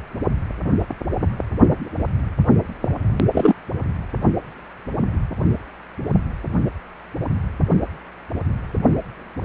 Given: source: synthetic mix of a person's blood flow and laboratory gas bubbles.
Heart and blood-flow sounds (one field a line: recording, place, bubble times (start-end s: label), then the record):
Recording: Doppler ultrasound of blood flow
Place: precordium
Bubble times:
3.33-3.54 s: bubbles
From the record:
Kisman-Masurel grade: 113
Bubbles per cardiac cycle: 1 to 2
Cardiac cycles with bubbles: 1 to 10%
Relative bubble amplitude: loud (0.450 to 0.775)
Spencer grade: 1 (occasional bubble signal discernible with the cardiac motion signal, with majority of cardiac periods free of bubbles)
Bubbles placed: anywhere in the cardiac cycle